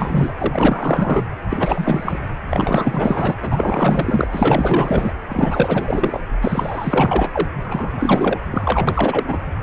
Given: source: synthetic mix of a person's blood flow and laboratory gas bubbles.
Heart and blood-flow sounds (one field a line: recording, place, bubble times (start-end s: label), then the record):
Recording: Doppler ultrasound of blood flow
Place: precordium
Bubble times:
0.00-0.34 s: bubbles
0.38-1.24 s: bubbles
1.50-2.19 s: bubbles
2.50-3.35 s: bubbles
3.40-4.27 s: bubbles
4.32-5.12 s: bubbles
5.28-6.20 s: bubbles
6.41-7.48 s: bubbles
7.62-8.40 s: bubbles
8.50-9.38 s: bubbles
From the record:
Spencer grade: 4 (maximum detectable bubble signal sounding continuously throughout systole and diastole of every cardiac period, and overriding the amplitude of the normal cardiac signals)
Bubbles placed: anywhere in the cardiac cycle